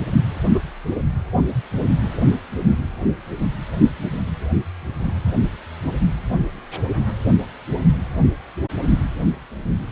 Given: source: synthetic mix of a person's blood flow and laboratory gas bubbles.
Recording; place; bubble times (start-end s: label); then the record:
Doppler ultrasound of blood flow; precordium
0.54-0.59 s: bubbles
From the record:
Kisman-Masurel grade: 113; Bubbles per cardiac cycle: 1 to 2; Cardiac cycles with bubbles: 1 to 10%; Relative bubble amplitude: loud (0.450 to 0.775); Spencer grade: 1 (occasional bubble signal discernible with the cardiac motion signal, with majority of cardiac periods free of bubbles); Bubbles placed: only in the low amplitude regions of the cardiac cycle